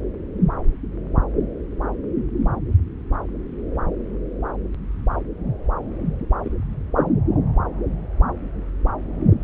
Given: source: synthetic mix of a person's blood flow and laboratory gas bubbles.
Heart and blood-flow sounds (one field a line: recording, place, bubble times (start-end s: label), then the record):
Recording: Doppler ultrasound of blood flow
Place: subclavian vein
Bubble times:
6.46-6.52 s: bubbles
6.97-7.07 s: bubbles
From the record:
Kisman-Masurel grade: 111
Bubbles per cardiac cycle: 1 to 2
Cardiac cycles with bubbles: 1 to 10%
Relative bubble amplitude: barely perceptible (0.100 to 0.250)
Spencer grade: 1 (occasional bubble signal discernible with the cardiac motion signal, with majority of cardiac periods free of bubbles)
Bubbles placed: anywhere in the cardiac cycle